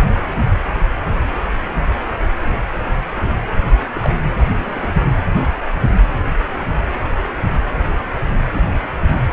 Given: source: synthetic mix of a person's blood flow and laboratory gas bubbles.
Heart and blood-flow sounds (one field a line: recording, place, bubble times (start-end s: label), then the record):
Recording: Doppler ultrasound of blood flow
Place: precordium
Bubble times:
0.14-0.20 s: bubbles
3.95-4.10 s: bubbles
4.57-4.92 s: bubbles
5.17-5.21 s: bubbles
8.54-8.60 s: bubbles
From the record:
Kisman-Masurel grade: 121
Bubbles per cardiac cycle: 1 to 2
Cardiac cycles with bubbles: 10 to 50%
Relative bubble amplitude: barely perceptible (0.100 to 0.250)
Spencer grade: 2 (many but less than half of the cardiac periods contain bubble signals, singularly or in groups)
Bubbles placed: anywhere in the cardiac cycle